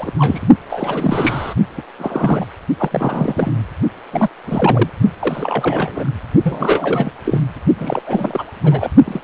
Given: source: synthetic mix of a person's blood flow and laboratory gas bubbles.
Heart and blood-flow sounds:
Doppler ultrasound of blood flow; precordium
0.00-0.12 s: bubbles
0.19-0.47 s: bubbles
0.69-1.54 s: bubbles
1.77-1.82 s: bubbles
1.98-2.46 s: bubbles
2.79-3.57 s: bubbles
4.12-4.29 s: bubbles
4.46-4.89 s: bubbles
5.20-6.10 s: bubbles
6.43-7.12 s: bubbles
7.25-7.45 s: bubbles
7.79-8.45 s: bubbles
8.64-8.89 s: bubbles
9.06-9.20 s: bubbles
From the record:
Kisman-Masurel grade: 342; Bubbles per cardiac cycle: rolling drumbeat, 9 or more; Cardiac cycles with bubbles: 100%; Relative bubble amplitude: moderate (0.250 to 0.450); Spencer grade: 3 (all of the cardiac periods contain showers or single bubble signals, but not dominating or overriding the cardiac motion signals); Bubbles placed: only in the low amplitude regions of the cardiac cycle

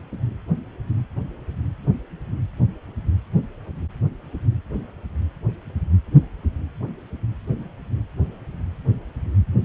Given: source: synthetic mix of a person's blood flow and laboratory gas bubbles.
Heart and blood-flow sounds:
Doppler ultrasound of blood flow; precordium
no bubbles
From the record:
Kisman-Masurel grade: 000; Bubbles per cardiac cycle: 0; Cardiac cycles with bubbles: 0%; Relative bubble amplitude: no bubbles discernible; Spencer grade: 0 (complete lack of bubble signals)

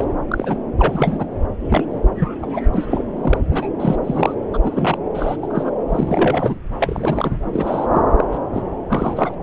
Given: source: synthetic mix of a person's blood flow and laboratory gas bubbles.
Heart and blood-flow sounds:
Doppler ultrasound of blood flow; subclavian vein
0.00-0.04 s: bubbles
0.28-0.58 s: bubbles
0.77-1.25 s: bubbles
1.70-1.84 s: bubbles
2.20-2.29 s: bubbles
2.42-2.46 s: bubbles
2.53-2.62 s: bubbles
2.74-3.03 s: bubbles
3.17-3.38 s: bubbles
3.51-3.70 s: bubbles
3.79-3.97 s: bubbles
4.04-4.34 s: bubbles
4.54-4.58 s: bubbles
4.62-4.98 s: bubbles
5.15-5.37 s: bubbles
5.42-5.47 s: bubbles
5.50-5.71 s: bubbles
5.88-6.59 s: bubbles
6.79-7.37 s: bubbles
7.53-7.87 s: bubbles
7.93-8.02 s: bubbles
8.19-8.23 s: bubbles
8.31-8.38 s: bubbles
8.53-8.62 s: bubbles
8.88-9.35 s: bubbles
From the record:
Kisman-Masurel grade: 242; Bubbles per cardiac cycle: several, 3 to 8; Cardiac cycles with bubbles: 100%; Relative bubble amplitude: moderate (0.250 to 0.450); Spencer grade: 3 (all of the cardiac periods contain showers or single bubble signals, but not dominating or overriding the cardiac motion signals); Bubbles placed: anywhere in the cardiac cycle

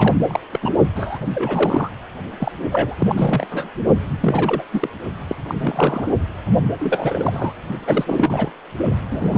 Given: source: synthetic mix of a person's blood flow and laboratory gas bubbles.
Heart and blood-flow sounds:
Doppler ultrasound of blood flow; precordium
0.00-0.15 s: bubbles
0.28-0.40 s: bubbles
0.53-0.59 s: bubbles
0.62-0.72 s: bubbles
0.95-1.19 s: bubbles
1.34-1.90 s: bubbles
2.40-2.52 s: bubbles
2.72-2.96 s: bubbles
2.99-3.47 s: bubbles
3.50-3.70 s: bubbles
4.20-4.63 s: bubbles
4.73-4.89 s: bubbles
5.29-5.36 s: bubbles
5.49-5.54 s: bubbles
5.59-6.08 s: bubbles
6.79-7.54 s: bubbles
7.86-8.51 s: bubbles
9.10-9.38 s: bubbles
From the record:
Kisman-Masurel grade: 342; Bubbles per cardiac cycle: rolling drumbeat, 9 or more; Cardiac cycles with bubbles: 100%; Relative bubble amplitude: moderate (0.250 to 0.450); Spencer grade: 3 (all of the cardiac periods contain showers or single bubble signals, but not dominating or overriding the cardiac motion signals); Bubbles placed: only in the low amplitude regions of the cardiac cycle

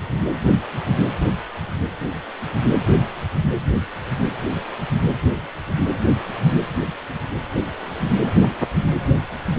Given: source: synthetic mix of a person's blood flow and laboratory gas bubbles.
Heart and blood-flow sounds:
Doppler ultrasound of blood flow; precordium
no bubbles
From the record:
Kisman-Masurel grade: 000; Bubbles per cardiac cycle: 0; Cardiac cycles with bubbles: 0%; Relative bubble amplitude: no bubbles discernible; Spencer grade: 0 (complete lack of bubble signals)

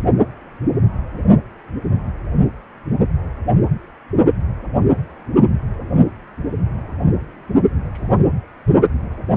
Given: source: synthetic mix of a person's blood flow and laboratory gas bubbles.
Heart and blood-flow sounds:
Doppler ultrasound of blood flow; precordium
7.93-8.24 s: bubbles
From the record:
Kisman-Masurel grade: 121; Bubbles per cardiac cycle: 1 to 2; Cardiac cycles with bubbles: 10 to 50%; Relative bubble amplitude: barely perceptible (0.100 to 0.250); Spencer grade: 2 (many but less than half of the cardiac periods contain bubble signals, singularly or in groups); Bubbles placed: only in the low amplitude regions of the cardiac cycle

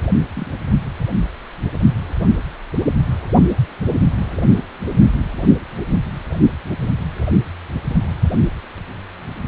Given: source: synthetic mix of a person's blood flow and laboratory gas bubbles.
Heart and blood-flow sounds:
Doppler ultrasound of blood flow; precordium
0.33-0.46 s: bubbles
From the record:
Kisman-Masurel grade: 111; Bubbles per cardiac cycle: 1 to 2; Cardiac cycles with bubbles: 1 to 10%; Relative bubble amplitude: barely perceptible (0.100 to 0.250); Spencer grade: 1 (occasional bubble signal discernible with the cardiac motion signal, with majority of cardiac periods free of bubbles); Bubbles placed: anywhere in the cardiac cycle

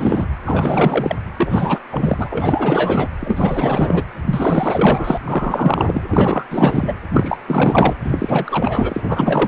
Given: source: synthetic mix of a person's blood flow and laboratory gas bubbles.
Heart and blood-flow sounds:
Doppler ultrasound of blood flow; precordium
0.00-0.27 s: bubbles
0.45-1.16 s: bubbles
1.38-1.79 s: bubbles
1.90-3.08 s: bubbles
3.19-4.04 s: bubbles
4.26-5.18 s: bubbles
5.24-6.03 s: bubbles
6.10-6.44 s: bubbles
6.51-6.93 s: bubbles
7.14-7.38 s: bubbles
7.47-7.95 s: bubbles
8.04-9.48 s: bubbles
From the record:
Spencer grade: 4 (maximum detectable bubble signal sounding continuously throughout systole and diastole of every cardiac period, and overriding the amplitude of the normal cardiac signals); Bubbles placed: anywhere in the cardiac cycle

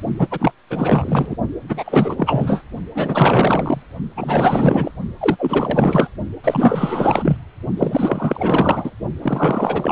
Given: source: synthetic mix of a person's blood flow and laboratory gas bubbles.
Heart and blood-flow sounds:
Doppler ultrasound of blood flow; precordium
0.17-0.27 s: bubbles
0.30-0.52 s: bubbles
0.70-1.36 s: bubbles
1.69-2.62 s: bubbles
2.94-3.83 s: bubbles
4.15-4.92 s: bubbles
5.21-6.08 s: bubbles
6.44-7.37 s: bubbles
7.76-8.90 s: bubbles
9.22-9.92 s: bubbles
From the record:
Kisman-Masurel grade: 444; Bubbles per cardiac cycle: continuous sound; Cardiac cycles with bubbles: 100%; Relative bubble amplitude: maximal (0.775 to 0.999); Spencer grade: 4 (maximum detectable bubble signal sounding continuously throughout systole and diastole of every cardiac period, and overriding the amplitude of the normal cardiac signals); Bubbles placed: only in the low amplitude regions of the cardiac cycle

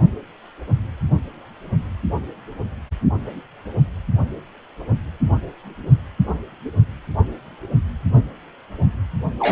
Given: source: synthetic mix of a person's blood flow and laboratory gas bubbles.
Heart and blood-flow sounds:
Doppler ultrasound of blood flow; precordium
9.39-9.52 s: bubbles
From the record:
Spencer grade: 2 (many but less than half of the cardiac periods contain bubble signals, singularly or in groups); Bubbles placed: only in the low amplitude regions of the cardiac cycle

